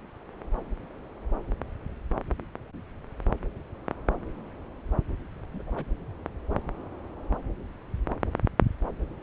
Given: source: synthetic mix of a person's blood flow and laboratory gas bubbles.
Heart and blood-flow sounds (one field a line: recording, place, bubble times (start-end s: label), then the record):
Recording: Doppler ultrasound of blood flow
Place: subclavian vein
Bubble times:
5.54-5.62 s: bubbles
5.67-5.71 s: bubbles
5.75-5.85 s: bubbles
From the record:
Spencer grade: 1 (occasional bubble signal discernible with the cardiac motion signal, with majority of cardiac periods free of bubbles)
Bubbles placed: anywhere in the cardiac cycle